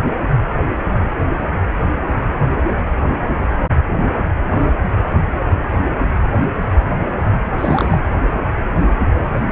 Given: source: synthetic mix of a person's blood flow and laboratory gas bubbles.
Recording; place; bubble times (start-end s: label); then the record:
Doppler ultrasound of blood flow; precordium
7.57-8.00 s: bubbles
From the record:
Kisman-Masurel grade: 212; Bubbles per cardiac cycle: several, 3 to 8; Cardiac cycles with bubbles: 1 to 10%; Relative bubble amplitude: moderate (0.250 to 0.450); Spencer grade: 1 (occasional bubble signal discernible with the cardiac motion signal, with majority of cardiac periods free of bubbles); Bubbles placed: anywhere in the cardiac cycle